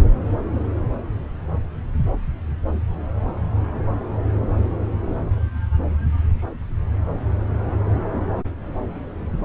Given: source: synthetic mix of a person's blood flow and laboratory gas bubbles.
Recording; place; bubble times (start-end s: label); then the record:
Doppler ultrasound of blood flow; subclavian vein
no bubbles
From the record:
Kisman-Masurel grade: 000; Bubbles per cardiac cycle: 0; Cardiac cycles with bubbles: 0%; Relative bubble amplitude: no bubbles discernible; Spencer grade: 0 (complete lack of bubble signals)